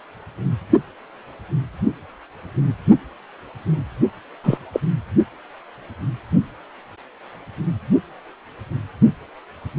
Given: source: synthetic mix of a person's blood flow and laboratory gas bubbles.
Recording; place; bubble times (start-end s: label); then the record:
Doppler ultrasound of blood flow; precordium
4.43-4.58 s: bubbles
4.72-4.80 s: bubbles
From the record:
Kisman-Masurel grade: 113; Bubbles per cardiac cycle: 1 to 2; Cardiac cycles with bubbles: 1 to 10%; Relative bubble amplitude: loud (0.450 to 0.775); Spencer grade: 1 (occasional bubble signal discernible with the cardiac motion signal, with majority of cardiac periods free of bubbles); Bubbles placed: anywhere in the cardiac cycle